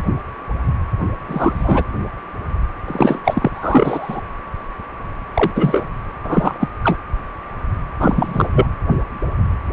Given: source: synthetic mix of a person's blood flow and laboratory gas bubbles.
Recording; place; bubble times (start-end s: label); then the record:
Doppler ultrasound of blood flow; precordium
1.28-1.85 s: bubbles
2.87-3.19 s: bubbles
3.24-3.51 s: bubbles
3.53-4.21 s: bubbles
5.34-5.51 s: bubbles
5.56-5.88 s: bubbles
6.24-6.68 s: bubbles
6.83-6.98 s: bubbles
8.00-8.48 s: bubbles
8.54-8.66 s: bubbles
From the record:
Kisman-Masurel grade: 233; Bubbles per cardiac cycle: several, 3 to 8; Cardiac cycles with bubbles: 50 to 99%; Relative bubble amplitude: loud (0.450 to 0.775); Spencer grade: 3 (all of the cardiac periods contain showers or single bubble signals, but not dominating or overriding the cardiac motion signals); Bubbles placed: anywhere in the cardiac cycle